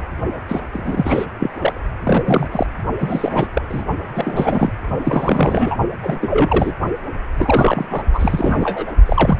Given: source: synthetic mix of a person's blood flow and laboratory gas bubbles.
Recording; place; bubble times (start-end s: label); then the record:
Doppler ultrasound of blood flow; precordium
0.00-0.02 s: bubbles
0.49-0.61 s: bubbles
0.73-1.26 s: bubbles
1.40-1.51 s: bubbles
1.57-1.80 s: bubbles
2.03-2.46 s: bubbles
2.51-2.67 s: bubbles
3.00-3.47 s: bubbles
3.53-3.62 s: bubbles
3.68-3.83 s: bubbles
4.14-4.72 s: bubbles
5.04-5.76 s: bubbles
6.02-6.19 s: bubbles
6.21-6.72 s: bubbles
7.38-7.87 s: bubbles
7.90-8.03 s: bubbles
8.13-8.92 s: bubbles
9.06-9.38 s: bubbles
From the record:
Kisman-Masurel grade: 342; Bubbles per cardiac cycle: rolling drumbeat, 9 or more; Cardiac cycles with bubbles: 100%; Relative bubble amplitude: moderate (0.250 to 0.450); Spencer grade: 3 (all of the cardiac periods contain showers or single bubble signals, but not dominating or overriding the cardiac motion signals); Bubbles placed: only in the low amplitude regions of the cardiac cycle